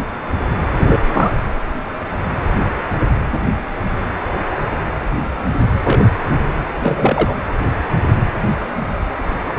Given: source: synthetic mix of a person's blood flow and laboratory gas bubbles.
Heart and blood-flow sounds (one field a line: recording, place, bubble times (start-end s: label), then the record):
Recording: Doppler ultrasound of blood flow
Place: precordium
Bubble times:
0.78-1.00 s: bubbles
1.05-1.30 s: bubbles
5.84-6.04 s: bubbles
6.32-6.38 s: bubbles
6.82-7.36 s: bubbles
From the record:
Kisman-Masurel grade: 223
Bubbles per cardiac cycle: several, 3 to 8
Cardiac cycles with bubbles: 10 to 50%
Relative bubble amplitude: loud (0.450 to 0.775)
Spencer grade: 2 (many but less than half of the cardiac periods contain bubble signals, singularly or in groups)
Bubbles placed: anywhere in the cardiac cycle